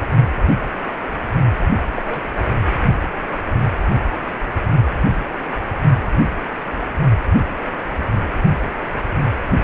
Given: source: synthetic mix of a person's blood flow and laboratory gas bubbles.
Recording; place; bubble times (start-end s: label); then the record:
Doppler ultrasound of blood flow; precordium
1.96-2.03 s: bubbles
2.06-2.27 s: bubbles
From the record:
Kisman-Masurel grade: 121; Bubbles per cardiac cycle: 1 to 2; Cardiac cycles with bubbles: 10 to 50%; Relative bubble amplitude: barely perceptible (0.100 to 0.250); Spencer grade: 2 (many but less than half of the cardiac periods contain bubble signals, singularly or in groups); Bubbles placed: only in the low amplitude regions of the cardiac cycle